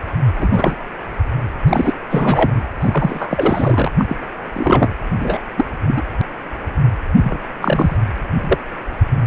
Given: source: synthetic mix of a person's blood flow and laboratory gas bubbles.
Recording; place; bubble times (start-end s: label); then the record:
Doppler ultrasound of blood flow; precordium
0.38-0.76 s: bubbles
1.68-1.97 s: bubbles
2.10-2.67 s: bubbles
2.79-3.89 s: bubbles
3.98-4.05 s: bubbles
4.08-4.16 s: bubbles
4.53-4.95 s: bubbles
5.20-5.38 s: bubbles
5.57-5.65 s: bubbles
5.86-6.03 s: bubbles
7.22-7.38 s: bubbles
7.61-7.96 s: bubbles
8.41-8.58 s: bubbles
From the record:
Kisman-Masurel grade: 243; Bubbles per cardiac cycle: several, 3 to 8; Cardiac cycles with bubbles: 100%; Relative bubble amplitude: loud (0.450 to 0.775); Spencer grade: 3 (all of the cardiac periods contain showers or single bubble signals, but not dominating or overriding the cardiac motion signals); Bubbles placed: anywhere in the cardiac cycle